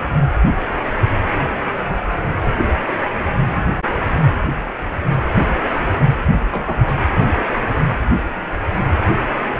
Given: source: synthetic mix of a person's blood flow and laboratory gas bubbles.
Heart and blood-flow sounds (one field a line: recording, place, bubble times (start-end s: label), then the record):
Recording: Doppler ultrasound of blood flow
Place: precordium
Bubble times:
6.51-7.01 s: bubbles
From the record:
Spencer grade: 1 (occasional bubble signal discernible with the cardiac motion signal, with majority of cardiac periods free of bubbles)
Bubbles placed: anywhere in the cardiac cycle